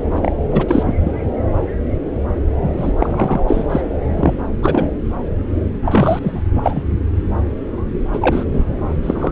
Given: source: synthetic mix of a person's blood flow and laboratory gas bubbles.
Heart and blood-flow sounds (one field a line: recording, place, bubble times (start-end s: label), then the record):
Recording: Doppler ultrasound of blood flow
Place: subclavian vein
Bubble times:
0.14-0.32 s: bubbles
0.52-0.95 s: bubbles
1.00-1.15 s: bubbles
2.61-2.70 s: bubbles
2.77-2.92 s: bubbles
2.99-3.43 s: bubbles
3.47-3.67 s: bubbles
3.70-3.81 s: bubbles
4.05-4.43 s: bubbles
4.62-4.90 s: bubbles
5.83-6.19 s: bubbles
6.21-6.41 s: bubbles
6.58-6.83 s: bubbles
8.13-8.45 s: bubbles
8.47-8.65 s: bubbles
9.03-9.31 s: bubbles
From the record:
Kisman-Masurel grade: 233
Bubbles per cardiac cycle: several, 3 to 8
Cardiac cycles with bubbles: 50 to 99%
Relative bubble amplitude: loud (0.450 to 0.775)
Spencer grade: 3 (all of the cardiac periods contain showers or single bubble signals, but not dominating or overriding the cardiac motion signals)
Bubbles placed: anywhere in the cardiac cycle